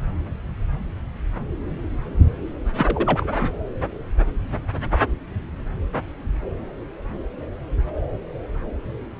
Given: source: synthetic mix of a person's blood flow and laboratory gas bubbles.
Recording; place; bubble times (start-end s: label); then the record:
Doppler ultrasound of blood flow; subclavian vein
2.77-3.27 s: bubbles
3.34-3.48 s: bubbles
From the record:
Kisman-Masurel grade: 212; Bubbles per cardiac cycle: several, 3 to 8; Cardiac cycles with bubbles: 1 to 10%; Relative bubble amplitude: moderate (0.250 to 0.450); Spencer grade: 1 (occasional bubble signal discernible with the cardiac motion signal, with majority of cardiac periods free of bubbles); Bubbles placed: anywhere in the cardiac cycle